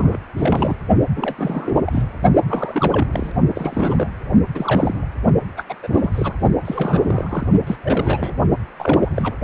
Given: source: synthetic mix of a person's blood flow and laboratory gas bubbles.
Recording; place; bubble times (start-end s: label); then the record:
Doppler ultrasound of blood flow; precordium
0.00-0.17 s: bubbles
0.37-0.74 s: bubbles
1.17-1.35 s: bubbles
1.38-1.82 s: bubbles
1.85-2.03 s: bubbles
2.43-3.31 s: bubbles
3.54-4.08 s: bubbles
4.54-5.07 s: bubbles
5.57-5.64 s: bubbles
5.69-5.75 s: bubbles
5.83-5.88 s: bubbles
5.92-6.11 s: bubbles
6.15-6.33 s: bubbles
6.65-7.47 s: bubbles
7.67-7.77 s: bubbles
7.82-8.33 s: bubbles
8.79-9.34 s: bubbles
From the record:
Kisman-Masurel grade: 332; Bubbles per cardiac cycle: rolling drumbeat, 9 or more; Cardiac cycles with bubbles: 50 to 99%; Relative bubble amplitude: moderate (0.250 to 0.450); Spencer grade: 3 (all of the cardiac periods contain showers or single bubble signals, but not dominating or overriding the cardiac motion signals); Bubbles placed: only in the low amplitude regions of the cardiac cycle